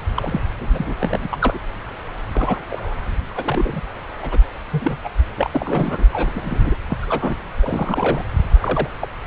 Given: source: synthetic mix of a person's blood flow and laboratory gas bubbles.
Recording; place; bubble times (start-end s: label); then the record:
Doppler ultrasound of blood flow; subclavian vein
0.15-0.41 s: bubbles
0.57-0.95 s: bubbles
0.99-1.28 s: bubbles
1.30-1.58 s: bubbles
2.32-2.62 s: bubbles
2.70-2.93 s: bubbles
3.29-3.81 s: bubbles
4.22-4.38 s: bubbles
4.71-4.97 s: bubbles
5.04-5.09 s: bubbles
5.36-5.50 s: bubbles
5.54-6.05 s: bubbles
6.12-6.31 s: bubbles
6.34-6.76 s: bubbles
6.89-6.97 s: bubbles
7.01-7.36 s: bubbles
7.62-8.23 s: bubbles
8.60-8.88 s: bubbles
9.01-9.09 s: bubbles
From the record:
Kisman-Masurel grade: 242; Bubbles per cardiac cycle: several, 3 to 8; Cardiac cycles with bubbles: 100%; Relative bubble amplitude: moderate (0.250 to 0.450); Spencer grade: 3 (all of the cardiac periods contain showers or single bubble signals, but not dominating or overriding the cardiac motion signals); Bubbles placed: anywhere in the cardiac cycle